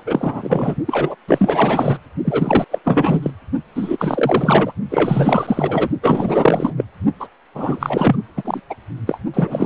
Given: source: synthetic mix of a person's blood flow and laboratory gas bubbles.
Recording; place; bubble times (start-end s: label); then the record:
Doppler ultrasound of blood flow; precordium
0.00-0.03 s: bubbles
0.06-0.75 s: bubbles
0.86-1.16 s: bubbles
1.27-1.98 s: bubbles
2.24-2.65 s: bubbles
2.71-2.79 s: bubbles
2.84-3.31 s: bubbles
3.75-4.73 s: bubbles
4.89-5.89 s: bubbles
6.02-6.74 s: bubbles
6.76-6.84 s: bubbles
7.20-7.28 s: bubbles
7.54-8.16 s: bubbles
8.37-8.60 s: bubbles
8.70-8.75 s: bubbles
9.06-9.20 s: bubbles
9.34-9.66 s: bubbles
From the record:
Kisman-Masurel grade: 444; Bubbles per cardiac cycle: continuous sound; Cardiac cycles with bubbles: 100%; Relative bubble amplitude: maximal (0.775 to 0.999); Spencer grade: 4 (maximum detectable bubble signal sounding continuously throughout systole and diastole of every cardiac period, and overriding the amplitude of the normal cardiac signals); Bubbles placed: only in the low amplitude regions of the cardiac cycle